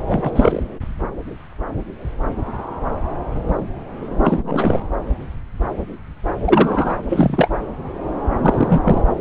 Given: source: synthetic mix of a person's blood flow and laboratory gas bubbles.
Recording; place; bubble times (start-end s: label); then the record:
Doppler ultrasound of blood flow; subclavian vein
0.07-0.62 s: bubbles
4.23-4.78 s: bubbles
6.45-6.96 s: bubbles
7.09-7.50 s: bubbles
8.42-8.81 s: bubbles
8.84-9.02 s: bubbles
From the record:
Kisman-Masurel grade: 223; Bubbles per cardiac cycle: several, 3 to 8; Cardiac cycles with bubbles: 10 to 50%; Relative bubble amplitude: loud (0.450 to 0.775); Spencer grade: 2 (many but less than half of the cardiac periods contain bubble signals, singularly or in groups); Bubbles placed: anywhere in the cardiac cycle